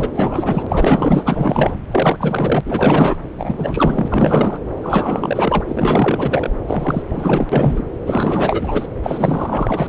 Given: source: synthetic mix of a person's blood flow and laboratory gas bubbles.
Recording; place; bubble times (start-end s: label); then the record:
Doppler ultrasound of blood flow; subclavian vein
0.00-0.09 s: bubbles
0.15-1.76 s: bubbles
1.91-2.61 s: bubbles
2.65-3.16 s: bubbles
3.37-4.59 s: bubbles
4.83-5.64 s: bubbles
5.67-6.50 s: bubbles
6.67-7.03 s: bubbles
7.10-7.47 s: bubbles
7.52-7.84 s: bubbles
8.05-8.89 s: bubbles
9.03-9.89 s: bubbles
From the record:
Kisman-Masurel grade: 444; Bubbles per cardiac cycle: continuous sound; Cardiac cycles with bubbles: 100%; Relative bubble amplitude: maximal (0.775 to 0.999); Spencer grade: 4 (maximum detectable bubble signal sounding continuously throughout systole and diastole of every cardiac period, and overriding the amplitude of the normal cardiac signals); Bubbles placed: anywhere in the cardiac cycle